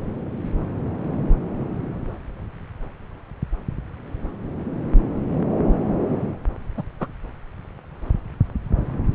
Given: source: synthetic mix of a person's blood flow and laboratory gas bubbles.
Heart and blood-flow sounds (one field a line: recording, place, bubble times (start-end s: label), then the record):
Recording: Doppler ultrasound of blood flow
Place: subclavian vein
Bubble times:
6.77-6.83 s: bubbles
7.00-7.07 s: bubbles
From the record:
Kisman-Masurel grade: 122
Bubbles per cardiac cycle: 1 to 2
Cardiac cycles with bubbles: 10 to 50%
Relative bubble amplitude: moderate (0.250 to 0.450)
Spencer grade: 2 (many but less than half of the cardiac periods contain bubble signals, singularly or in groups)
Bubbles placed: anywhere in the cardiac cycle